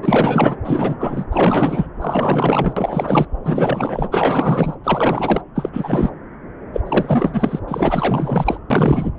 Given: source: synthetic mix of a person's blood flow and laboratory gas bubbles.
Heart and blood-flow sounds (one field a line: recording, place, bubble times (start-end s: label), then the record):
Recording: Doppler ultrasound of blood flow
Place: subclavian vein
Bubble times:
0.02-0.57 s: bubbles
0.64-1.25 s: bubbles
1.31-1.87 s: bubbles
2.01-2.74 s: bubbles
2.77-3.27 s: bubbles
3.44-4.75 s: bubbles
4.83-5.42 s: bubbles
5.55-5.69 s: bubbles
5.72-6.09 s: bubbles
6.73-6.80 s: bubbles
6.85-7.59 s: bubbles
7.67-8.58 s: bubbles
8.70-9.11 s: bubbles
From the record:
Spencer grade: 4 (maximum detectable bubble signal sounding continuously throughout systole and diastole of every cardiac period, and overriding the amplitude of the normal cardiac signals)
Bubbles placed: anywhere in the cardiac cycle